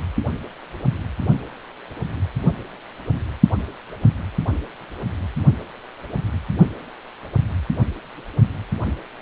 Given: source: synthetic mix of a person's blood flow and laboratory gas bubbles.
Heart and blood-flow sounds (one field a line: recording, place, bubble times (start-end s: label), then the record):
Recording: Doppler ultrasound of blood flow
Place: precordium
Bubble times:
no bubbles
From the record:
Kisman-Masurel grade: 000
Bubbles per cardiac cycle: 0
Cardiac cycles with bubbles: 0%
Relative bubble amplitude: no bubbles discernible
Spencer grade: 0 (complete lack of bubble signals)